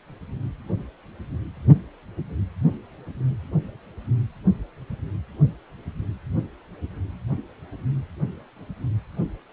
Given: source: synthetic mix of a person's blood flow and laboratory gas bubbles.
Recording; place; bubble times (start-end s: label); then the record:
Doppler ultrasound of blood flow; precordium
no bubbles
From the record:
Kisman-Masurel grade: 000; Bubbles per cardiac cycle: 0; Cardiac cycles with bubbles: 0%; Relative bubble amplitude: no bubbles discernible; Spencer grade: 0 (complete lack of bubble signals)